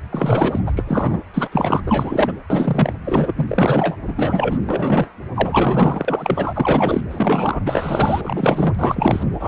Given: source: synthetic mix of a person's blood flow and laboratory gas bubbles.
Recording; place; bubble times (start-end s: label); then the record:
Doppler ultrasound of blood flow; precordium
0.10-0.60 s: bubbles
0.67-0.72 s: bubbles
0.75-1.19 s: bubbles
1.33-1.48 s: bubbles
1.51-1.81 s: bubbles
1.86-2.33 s: bubbles
2.50-2.93 s: bubbles
3.04-3.32 s: bubbles
3.37-3.46 s: bubbles
3.49-3.96 s: bubbles
4.07-4.58 s: bubbles
4.69-5.10 s: bubbles
5.36-6.05 s: bubbles
6.08-7.01 s: bubbles
7.10-7.60 s: bubbles
7.66-8.75 s: bubbles
8.79-9.23 s: bubbles
9.39-9.48 s: bubbles
From the record:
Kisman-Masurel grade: 343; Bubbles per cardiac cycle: rolling drumbeat, 9 or more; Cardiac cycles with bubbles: 100%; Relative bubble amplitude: loud (0.450 to 0.775); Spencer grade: 3 (all of the cardiac periods contain showers or single bubble signals, but not dominating or overriding the cardiac motion signals); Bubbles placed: anywhere in the cardiac cycle